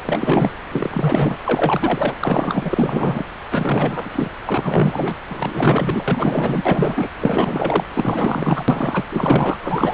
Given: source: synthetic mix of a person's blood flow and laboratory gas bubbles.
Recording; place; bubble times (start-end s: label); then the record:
Doppler ultrasound of blood flow; subclavian vein
0.05-0.52 s: bubbles
0.71-1.38 s: bubbles
1.43-2.15 s: bubbles
2.23-3.24 s: bubbles
3.50-4.10 s: bubbles
4.12-4.30 s: bubbles
4.46-5.17 s: bubbles
5.30-6.04 s: bubbles
6.08-7.09 s: bubbles
7.20-7.84 s: bubbles
7.94-8.64 s: bubbles
8.68-9.05 s: bubbles
9.09-9.59 s: bubbles
9.62-9.94 s: bubbles
From the record:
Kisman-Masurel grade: 444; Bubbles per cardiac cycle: continuous sound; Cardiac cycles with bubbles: 100%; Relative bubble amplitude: maximal (0.775 to 0.999); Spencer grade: 4 (maximum detectable bubble signal sounding continuously throughout systole and diastole of every cardiac period, and overriding the amplitude of the normal cardiac signals); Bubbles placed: anywhere in the cardiac cycle